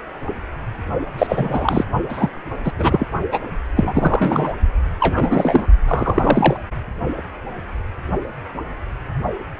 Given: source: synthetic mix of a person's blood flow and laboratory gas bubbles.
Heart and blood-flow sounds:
Doppler ultrasound of blood flow; precordium
1.18-1.84 s: bubbles
2.09-2.29 s: bubbles
2.64-2.72 s: bubbles
2.78-3.06 s: bubbles
3.31-3.40 s: bubbles
3.75-4.54 s: bubbles
4.99-5.67 s: bubbles
5.88-6.57 s: bubbles
From the record:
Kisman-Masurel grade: 233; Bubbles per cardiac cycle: several, 3 to 8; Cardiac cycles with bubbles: 50 to 99%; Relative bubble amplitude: loud (0.450 to 0.775); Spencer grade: 3 (all of the cardiac periods contain showers or single bubble signals, but not dominating or overriding the cardiac motion signals); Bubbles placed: only in the low amplitude regions of the cardiac cycle

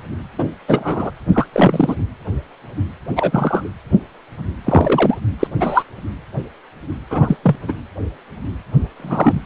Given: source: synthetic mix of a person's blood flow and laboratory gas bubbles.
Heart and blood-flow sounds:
Doppler ultrasound of blood flow; precordium
0.38-0.46 s: bubbles
0.68-1.11 s: bubbles
1.32-1.46 s: bubbles
1.52-1.96 s: bubbles
3.15-3.70 s: bubbles
4.64-5.17 s: bubbles
5.39-5.47 s: bubbles
5.59-5.83 s: bubbles
7.10-7.37 s: bubbles
7.43-7.55 s: bubbles
7.68-7.73 s: bubbles
8.97-9.40 s: bubbles
From the record:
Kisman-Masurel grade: 233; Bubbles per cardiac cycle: several, 3 to 8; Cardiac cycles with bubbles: 50 to 99%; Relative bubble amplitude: loud (0.450 to 0.775); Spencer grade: 3 (all of the cardiac periods contain showers or single bubble signals, but not dominating or overriding the cardiac motion signals); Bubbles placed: anywhere in the cardiac cycle

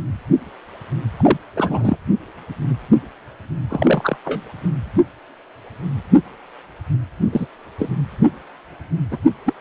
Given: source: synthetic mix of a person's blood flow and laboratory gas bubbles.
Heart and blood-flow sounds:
Doppler ultrasound of blood flow; precordium
1.17-1.37 s: bubbles
1.56-1.97 s: bubbles
3.69-4.17 s: bubbles
4.25-4.41 s: bubbles
7.32-7.46 s: bubbles
7.79-7.89 s: bubbles
9.11-9.18 s: bubbles
9.46-9.54 s: bubbles
From the record:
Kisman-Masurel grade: 223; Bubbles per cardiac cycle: several, 3 to 8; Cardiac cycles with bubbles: 10 to 50%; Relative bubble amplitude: loud (0.450 to 0.775); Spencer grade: 2 (many but less than half of the cardiac periods contain bubble signals, singularly or in groups); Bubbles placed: anywhere in the cardiac cycle

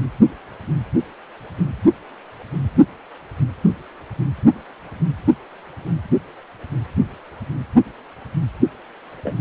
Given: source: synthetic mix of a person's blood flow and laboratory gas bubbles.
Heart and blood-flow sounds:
Doppler ultrasound of blood flow; precordium
9.24-9.34 s: bubbles
From the record:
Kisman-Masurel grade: 111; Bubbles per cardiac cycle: 1 to 2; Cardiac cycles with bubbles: 1 to 10%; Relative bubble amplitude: barely perceptible (0.100 to 0.250); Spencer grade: 1 (occasional bubble signal discernible with the cardiac motion signal, with majority of cardiac periods free of bubbles); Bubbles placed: anywhere in the cardiac cycle

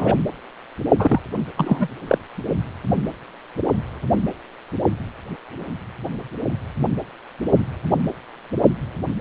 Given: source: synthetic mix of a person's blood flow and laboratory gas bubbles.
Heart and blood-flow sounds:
Doppler ultrasound of blood flow; precordium
0.00-0.16 s: bubbles
0.98-1.19 s: bubbles
1.56-1.88 s: bubbles
2.08-2.18 s: bubbles
From the record:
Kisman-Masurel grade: 223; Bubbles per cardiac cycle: several, 3 to 8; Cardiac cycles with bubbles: 10 to 50%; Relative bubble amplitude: loud (0.450 to 0.775); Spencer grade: 2 (many but less than half of the cardiac periods contain bubble signals, singularly or in groups); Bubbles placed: only in the low amplitude regions of the cardiac cycle

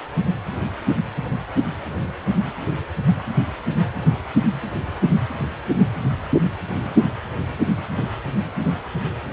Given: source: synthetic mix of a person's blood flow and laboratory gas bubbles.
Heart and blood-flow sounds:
Doppler ultrasound of blood flow; precordium
no bubbles
From the record:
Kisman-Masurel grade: 000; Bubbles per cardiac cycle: 0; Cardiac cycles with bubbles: 0%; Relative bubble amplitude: no bubbles discernible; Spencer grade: 0 (complete lack of bubble signals)

